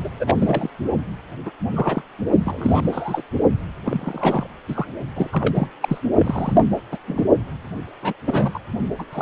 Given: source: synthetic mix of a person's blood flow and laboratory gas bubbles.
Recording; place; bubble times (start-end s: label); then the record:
Doppler ultrasound of blood flow; precordium
0.04-0.09 s: bubbles
0.20-0.70 s: bubbles
1.46-1.51 s: bubbles
1.75-2.02 s: bubbles
2.45-3.23 s: bubbles
3.84-4.46 s: bubbles
4.69-4.87 s: bubbles
5.16-5.67 s: bubbles
5.81-5.98 s: bubbles
6.19-6.64 s: bubbles
6.91-6.98 s: bubbles
7.07-7.24 s: bubbles
8.02-8.13 s: bubbles
8.26-8.59 s: bubbles
8.98-9.05 s: bubbles
9.12-9.22 s: bubbles
From the record:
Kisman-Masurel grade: 242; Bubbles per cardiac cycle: several, 3 to 8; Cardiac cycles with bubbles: 100%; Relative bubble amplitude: moderate (0.250 to 0.450); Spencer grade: 3 (all of the cardiac periods contain showers or single bubble signals, but not dominating or overriding the cardiac motion signals); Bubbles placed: only in the low amplitude regions of the cardiac cycle